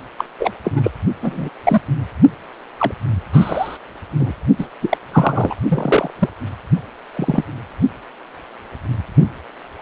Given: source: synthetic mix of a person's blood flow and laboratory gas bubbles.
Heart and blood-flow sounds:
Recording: Doppler ultrasound of blood flow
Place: precordium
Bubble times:
0.18-0.25 s: bubbles
0.40-0.51 s: bubbles
0.64-0.72 s: bubbles
0.75-0.91 s: bubbles
1.22-1.49 s: bubbles
1.64-1.81 s: bubbles
2.78-2.92 s: bubbles
3.33-3.78 s: bubbles
4.20-4.32 s: bubbles
4.58-4.67 s: bubbles
4.81-4.98 s: bubbles
5.12-5.54 s: bubbles
5.68-6.11 s: bubbles
6.19-6.29 s: bubbles
7.13-7.45 s: bubbles
From the record:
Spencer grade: 3 (all of the cardiac periods contain showers or single bubble signals, but not dominating or overriding the cardiac motion signals)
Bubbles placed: only in the low amplitude regions of the cardiac cycle

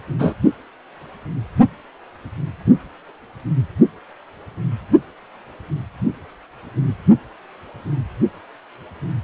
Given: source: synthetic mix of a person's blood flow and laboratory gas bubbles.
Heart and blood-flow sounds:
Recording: Doppler ultrasound of blood flow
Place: precordium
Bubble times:
0.18-0.34 s: bubbles
From the record:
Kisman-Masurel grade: 213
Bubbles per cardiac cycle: several, 3 to 8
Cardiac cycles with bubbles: 1 to 10%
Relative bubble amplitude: loud (0.450 to 0.775)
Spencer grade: 1 (occasional bubble signal discernible with the cardiac motion signal, with majority of cardiac periods free of bubbles)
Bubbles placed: only in the low amplitude regions of the cardiac cycle

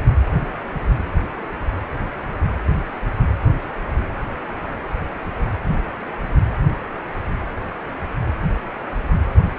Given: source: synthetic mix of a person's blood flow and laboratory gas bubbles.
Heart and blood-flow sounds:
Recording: Doppler ultrasound of blood flow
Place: precordium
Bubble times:
no bubbles
From the record:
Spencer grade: 0 (complete lack of bubble signals)

